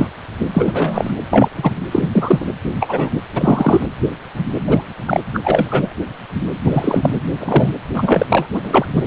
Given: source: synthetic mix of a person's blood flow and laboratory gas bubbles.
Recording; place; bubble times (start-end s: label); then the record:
Doppler ultrasound of blood flow; precordium
0.00-0.08 s: bubbles
0.39-0.49 s: bubbles
0.54-1.10 s: bubbles
1.30-1.49 s: bubbles
1.57-1.72 s: bubbles
1.91-2.08 s: bubbles
2.12-2.46 s: bubbles
2.79-3.10 s: bubbles
3.34-3.87 s: bubbles
4.67-4.85 s: bubbles
5.06-5.23 s: bubbles
5.34-5.40 s: bubbles
5.44-5.94 s: bubbles
6.65-7.20 s: bubbles
7.39-7.73 s: bubbles
7.93-8.26 s: bubbles
8.29-8.47 s: bubbles
8.52-8.85 s: bubbles
8.93-9.03 s: bubbles
From the record:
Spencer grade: 3 (all of the cardiac periods contain showers or single bubble signals, but not dominating or overriding the cardiac motion signals); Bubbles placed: anywhere in the cardiac cycle